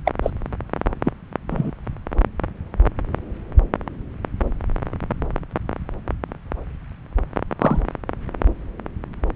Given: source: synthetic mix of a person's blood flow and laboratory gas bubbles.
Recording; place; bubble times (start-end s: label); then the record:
Doppler ultrasound of blood flow; subclavian vein
0.05-0.11 s: bubbles
0.23-0.30 s: bubbles
1.04-1.12 s: bubbles
1.49-1.71 s: bubbles
7.61-7.82 s: bubbles
From the record:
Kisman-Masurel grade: 123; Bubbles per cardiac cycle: 1 to 2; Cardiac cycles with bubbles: 10 to 50%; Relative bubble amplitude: loud (0.450 to 0.775); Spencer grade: 2 (many but less than half of the cardiac periods contain bubble signals, singularly or in groups); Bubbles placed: anywhere in the cardiac cycle